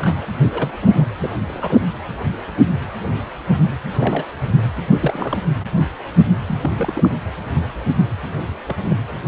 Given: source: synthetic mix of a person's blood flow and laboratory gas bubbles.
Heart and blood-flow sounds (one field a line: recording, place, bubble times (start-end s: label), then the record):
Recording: Doppler ultrasound of blood flow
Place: precordium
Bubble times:
0.00-0.16 s: bubbles
0.50-0.71 s: bubbles
0.81-1.07 s: bubbles
1.18-1.33 s: bubbles
1.48-1.91 s: bubbles
3.94-4.26 s: bubbles
5.00-5.39 s: bubbles
6.46-6.58 s: bubbles
6.61-7.10 s: bubbles
8.37-8.42 s: bubbles
8.67-8.76 s: bubbles
8.83-8.96 s: bubbles
From the record:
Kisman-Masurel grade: 232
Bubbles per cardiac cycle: several, 3 to 8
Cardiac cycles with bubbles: 50 to 99%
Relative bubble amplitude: moderate (0.250 to 0.450)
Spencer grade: 3 (all of the cardiac periods contain showers or single bubble signals, but not dominating or overriding the cardiac motion signals)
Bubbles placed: anywhere in the cardiac cycle